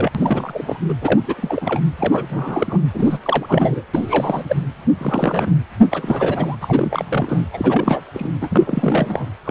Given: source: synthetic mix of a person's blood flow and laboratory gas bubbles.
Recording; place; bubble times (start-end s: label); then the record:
Doppler ultrasound of blood flow; precordium
0.00-0.12 s: bubbles
0.15-0.78 s: bubbles
0.88-0.94 s: bubbles
1.01-1.20 s: bubbles
1.27-1.80 s: bubbles
1.99-2.80 s: bubbles
2.94-3.18 s: bubbles
3.23-3.82 s: bubbles
3.94-4.44 s: bubbles
4.48-4.65 s: bubbles
4.98-5.60 s: bubbles
5.91-6.56 s: bubbles
6.61-7.45 s: bubbles
7.53-8.01 s: bubbles
8.14-8.30 s: bubbles
8.41-9.26 s: bubbles
9.44-9.50 s: bubbles
From the record:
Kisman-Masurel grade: 342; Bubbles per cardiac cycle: rolling drumbeat, 9 or more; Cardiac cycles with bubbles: 100%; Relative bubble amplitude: moderate (0.250 to 0.450); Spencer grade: 3 (all of the cardiac periods contain showers or single bubble signals, but not dominating or overriding the cardiac motion signals); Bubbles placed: anywhere in the cardiac cycle